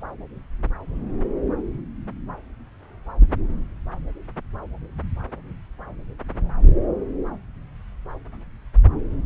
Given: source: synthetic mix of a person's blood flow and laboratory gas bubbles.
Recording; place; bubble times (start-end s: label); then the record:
Doppler ultrasound of blood flow; subclavian vein
no bubbles
From the record:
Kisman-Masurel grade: 000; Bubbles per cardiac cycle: 0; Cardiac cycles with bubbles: 0%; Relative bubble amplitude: no bubbles discernible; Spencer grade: 0 (complete lack of bubble signals)